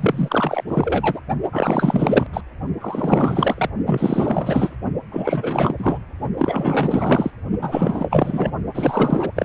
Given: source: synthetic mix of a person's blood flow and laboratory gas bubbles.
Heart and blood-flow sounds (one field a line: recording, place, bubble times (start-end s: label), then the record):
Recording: Doppler ultrasound of blood flow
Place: precordium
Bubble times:
0.00-0.64 s: bubbles
0.68-1.20 s: bubbles
1.52-2.26 s: bubbles
2.33-2.41 s: bubbles
2.80-3.69 s: bubbles
3.85-4.76 s: bubbles
5.11-5.75 s: bubbles
5.78-5.99 s: bubbles
6.38-7.31 s: bubbles
7.61-8.52 s: bubbles
8.74-9.32 s: bubbles
9.36-9.45 s: bubbles
From the record:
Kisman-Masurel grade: 444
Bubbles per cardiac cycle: continuous sound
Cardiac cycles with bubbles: 100%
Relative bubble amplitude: maximal (0.775 to 0.999)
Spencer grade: 4 (maximum detectable bubble signal sounding continuously throughout systole and diastole of every cardiac period, and overriding the amplitude of the normal cardiac signals)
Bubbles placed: only in the low amplitude regions of the cardiac cycle